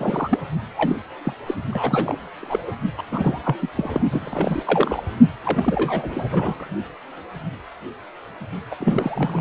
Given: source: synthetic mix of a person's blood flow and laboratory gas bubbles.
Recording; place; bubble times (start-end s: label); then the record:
Doppler ultrasound of blood flow; precordium
0.00-0.39 s: bubbles
0.77-0.98 s: bubbles
1.24-1.33 s: bubbles
1.46-1.54 s: bubbles
1.62-2.17 s: bubbles
2.40-2.62 s: bubbles
2.67-2.71 s: bubbles
2.97-3.02 s: bubbles
3.11-3.39 s: bubbles
3.44-3.56 s: bubbles
3.61-3.69 s: bubbles
3.76-4.02 s: bubbles
4.11-4.63 s: bubbles
4.66-5.02 s: bubbles
5.45-6.28 s: bubbles
6.30-6.68 s: bubbles
8.71-8.76 s: bubbles
8.80-9.41 s: bubbles
From the record:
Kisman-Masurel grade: 332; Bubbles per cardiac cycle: rolling drumbeat, 9 or more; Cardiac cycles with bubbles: 50 to 99%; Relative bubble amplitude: moderate (0.250 to 0.450); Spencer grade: 3 (all of the cardiac periods contain showers or single bubble signals, but not dominating or overriding the cardiac motion signals); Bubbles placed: only in the low amplitude regions of the cardiac cycle